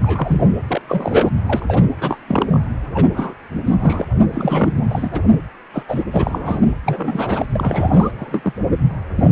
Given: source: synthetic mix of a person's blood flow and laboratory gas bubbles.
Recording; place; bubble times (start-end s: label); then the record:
Doppler ultrasound of blood flow; precordium
0.03-0.42 s: bubbles
0.67-0.81 s: bubbles
0.89-1.29 s: bubbles
1.46-1.82 s: bubbles
2.00-2.20 s: bubbles
2.27-2.60 s: bubbles
2.94-3.07 s: bubbles
3.14-3.34 s: bubbles
3.65-3.74 s: bubbles
3.79-4.05 s: bubbles
4.32-4.80 s: bubbles
4.89-5.21 s: bubbles
5.72-5.83 s: bubbles
5.88-6.04 s: bubbles
6.12-6.59 s: bubbles
6.86-7.46 s: bubbles
7.55-8.11 s: bubbles
8.19-8.53 s: bubbles
9.16-9.30 s: bubbles
From the record:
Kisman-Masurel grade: 242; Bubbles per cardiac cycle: several, 3 to 8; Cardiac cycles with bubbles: 100%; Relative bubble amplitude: moderate (0.250 to 0.450); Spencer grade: 3 (all of the cardiac periods contain showers or single bubble signals, but not dominating or overriding the cardiac motion signals); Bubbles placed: anywhere in the cardiac cycle